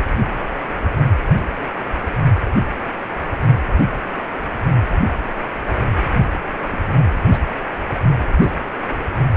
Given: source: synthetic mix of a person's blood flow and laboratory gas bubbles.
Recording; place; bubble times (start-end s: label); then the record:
Doppler ultrasound of blood flow; precordium
6.71-6.82 s: bubbles
7.19-7.38 s: bubbles
7.94-8.07 s: bubbles
8.27-8.52 s: bubbles
From the record:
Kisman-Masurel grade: 121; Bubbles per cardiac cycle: 1 to 2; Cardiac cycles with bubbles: 10 to 50%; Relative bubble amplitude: barely perceptible (0.100 to 0.250); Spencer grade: 2 (many but less than half of the cardiac periods contain bubble signals, singularly or in groups); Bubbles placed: anywhere in the cardiac cycle